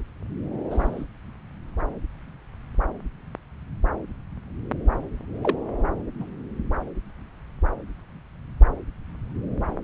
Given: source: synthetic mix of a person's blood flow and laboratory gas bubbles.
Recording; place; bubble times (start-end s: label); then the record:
Doppler ultrasound of blood flow; subclavian vein
0.71-1.04 s: bubbles
5.42-5.57 s: bubbles
6.19-6.25 s: bubbles
From the record:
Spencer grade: 2 (many but less than half of the cardiac periods contain bubble signals, singularly or in groups); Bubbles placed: anywhere in the cardiac cycle